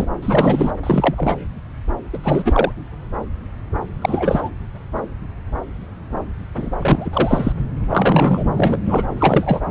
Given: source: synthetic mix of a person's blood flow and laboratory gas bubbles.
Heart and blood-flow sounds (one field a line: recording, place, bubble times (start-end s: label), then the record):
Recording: Doppler ultrasound of blood flow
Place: subclavian vein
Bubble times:
0.00-0.08 s: bubbles
0.22-0.71 s: bubbles
0.83-1.35 s: bubbles
2.12-2.18 s: bubbles
2.23-2.73 s: bubbles
4.01-4.49 s: bubbles
6.56-6.70 s: bubbles
6.81-7.10 s: bubbles
7.12-7.53 s: bubbles
7.89-8.44 s: bubbles
8.54-8.79 s: bubbles
8.85-9.03 s: bubbles
9.19-9.62 s: bubbles
9.67-9.70 s: bubbles
From the record:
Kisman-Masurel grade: 333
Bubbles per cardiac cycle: rolling drumbeat, 9 or more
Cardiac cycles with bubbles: 50 to 99%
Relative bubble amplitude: loud (0.450 to 0.775)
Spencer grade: 3 (all of the cardiac periods contain showers or single bubble signals, but not dominating or overriding the cardiac motion signals)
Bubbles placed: anywhere in the cardiac cycle